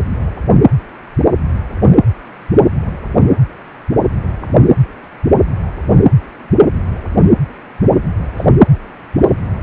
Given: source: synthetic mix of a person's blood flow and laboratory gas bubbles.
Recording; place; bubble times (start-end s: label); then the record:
Doppler ultrasound of blood flow; precordium
1.92-1.96 s: bubbles
8.37-8.46 s: bubbles
From the record:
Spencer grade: 1 (occasional bubble signal discernible with the cardiac motion signal, with majority of cardiac periods free of bubbles); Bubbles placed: anywhere in the cardiac cycle